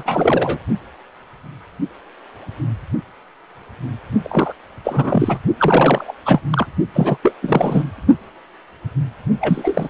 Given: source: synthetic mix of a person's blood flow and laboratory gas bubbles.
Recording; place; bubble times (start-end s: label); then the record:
Doppler ultrasound of blood flow; precordium
0.00-0.59 s: bubbles
4.24-4.54 s: bubbles
4.84-5.38 s: bubbles
5.58-6.12 s: bubbles
6.25-6.40 s: bubbles
6.52-6.67 s: bubbles
6.93-7.17 s: bubbles
7.22-7.33 s: bubbles
7.42-7.84 s: bubbles
9.40-9.88 s: bubbles
From the record:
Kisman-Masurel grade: 333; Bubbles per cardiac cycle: rolling drumbeat, 9 or more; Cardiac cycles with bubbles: 50 to 99%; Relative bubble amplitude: loud (0.450 to 0.775); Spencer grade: 3 (all of the cardiac periods contain showers or single bubble signals, but not dominating or overriding the cardiac motion signals); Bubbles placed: only in the low amplitude regions of the cardiac cycle